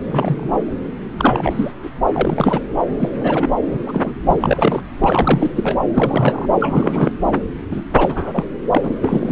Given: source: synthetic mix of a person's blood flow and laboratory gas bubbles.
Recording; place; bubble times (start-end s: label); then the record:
Doppler ultrasound of blood flow; subclavian vein
0.07-0.52 s: bubbles
1.17-1.71 s: bubbles
1.83-1.90 s: bubbles
2.13-2.69 s: bubbles
2.98-3.48 s: bubbles
3.71-3.83 s: bubbles
3.86-4.12 s: bubbles
4.28-4.85 s: bubbles
5.00-5.50 s: bubbles
5.55-5.75 s: bubbles
5.94-6.46 s: bubbles
6.61-7.12 s: bubbles
7.34-7.40 s: bubbles
7.70-7.82 s: bubbles
7.97-8.44 s: bubbles
8.71-8.81 s: bubbles
8.84-8.90 s: bubbles
9.02-9.32 s: bubbles
From the record:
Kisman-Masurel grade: 232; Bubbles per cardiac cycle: several, 3 to 8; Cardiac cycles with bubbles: 50 to 99%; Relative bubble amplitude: moderate (0.250 to 0.450); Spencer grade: 3 (all of the cardiac periods contain showers or single bubble signals, but not dominating or overriding the cardiac motion signals); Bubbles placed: anywhere in the cardiac cycle